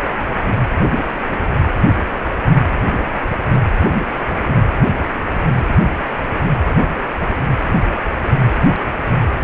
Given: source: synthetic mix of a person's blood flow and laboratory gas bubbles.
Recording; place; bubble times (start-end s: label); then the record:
Doppler ultrasound of blood flow; precordium
no bubbles
From the record:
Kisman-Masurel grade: 000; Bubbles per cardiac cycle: 0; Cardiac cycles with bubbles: 0%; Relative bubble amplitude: no bubbles discernible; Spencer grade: 0 (complete lack of bubble signals)